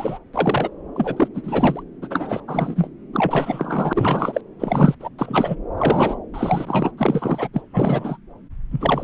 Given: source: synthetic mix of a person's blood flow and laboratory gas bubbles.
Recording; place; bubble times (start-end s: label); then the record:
Doppler ultrasound of blood flow; subclavian vein
0.00-0.19 s: bubbles
0.33-0.70 s: bubbles
0.96-1.28 s: bubbles
1.34-1.82 s: bubbles
2.02-2.41 s: bubbles
2.47-2.88 s: bubbles
3.13-4.41 s: bubbles
4.59-4.95 s: bubbles
5.00-5.09 s: bubbles
5.18-5.56 s: bubbles
5.77-6.19 s: bubbles
6.33-6.91 s: bubbles
6.98-7.49 s: bubbles
7.53-7.62 s: bubbles
7.73-8.17 s: bubbles
8.71-9.04 s: bubbles
From the record:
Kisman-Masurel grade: 343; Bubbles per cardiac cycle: rolling drumbeat, 9 or more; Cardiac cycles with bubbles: 100%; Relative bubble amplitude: loud (0.450 to 0.775); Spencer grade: 3 (all of the cardiac periods contain showers or single bubble signals, but not dominating or overriding the cardiac motion signals); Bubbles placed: anywhere in the cardiac cycle